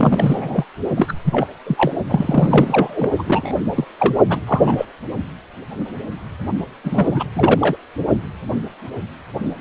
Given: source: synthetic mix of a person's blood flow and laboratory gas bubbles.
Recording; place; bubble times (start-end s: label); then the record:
Doppler ultrasound of blood flow; precordium
0.00-0.64 s: bubbles
0.95-1.14 s: bubbles
1.25-1.47 s: bubbles
1.67-1.93 s: bubbles
2.07-3.10 s: bubbles
3.19-3.53 s: bubbles
3.75-3.84 s: bubbles
3.99-4.14 s: bubbles
4.29-4.39 s: bubbles
4.46-4.85 s: bubbles
6.83-7.24 s: bubbles
7.34-7.77 s: bubbles
From the record:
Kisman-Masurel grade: 333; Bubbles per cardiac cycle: rolling drumbeat, 9 or more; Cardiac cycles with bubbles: 50 to 99%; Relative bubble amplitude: loud (0.450 to 0.775); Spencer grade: 3 (all of the cardiac periods contain showers or single bubble signals, but not dominating or overriding the cardiac motion signals); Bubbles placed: only in the low amplitude regions of the cardiac cycle